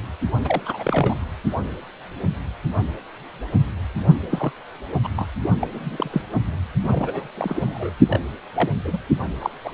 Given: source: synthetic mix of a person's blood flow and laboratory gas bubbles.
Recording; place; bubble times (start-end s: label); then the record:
Doppler ultrasound of blood flow; precordium
0.44-0.61 s: bubbles
0.65-1.28 s: bubbles
4.29-4.51 s: bubbles
5.03-5.08 s: bubbles
5.16-5.28 s: bubbles
5.60-5.67 s: bubbles
5.72-6.21 s: bubbles
6.83-7.28 s: bubbles
7.36-7.90 s: bubbles
8.09-8.19 s: bubbles
8.55-8.71 s: bubbles
8.84-8.97 s: bubbles
9.41-9.53 s: bubbles
9.64-9.71 s: bubbles
From the record:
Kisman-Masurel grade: 232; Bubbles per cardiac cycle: several, 3 to 8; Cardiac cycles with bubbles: 50 to 99%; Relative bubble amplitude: moderate (0.250 to 0.450); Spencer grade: 3 (all of the cardiac periods contain showers or single bubble signals, but not dominating or overriding the cardiac motion signals); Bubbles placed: only in the low amplitude regions of the cardiac cycle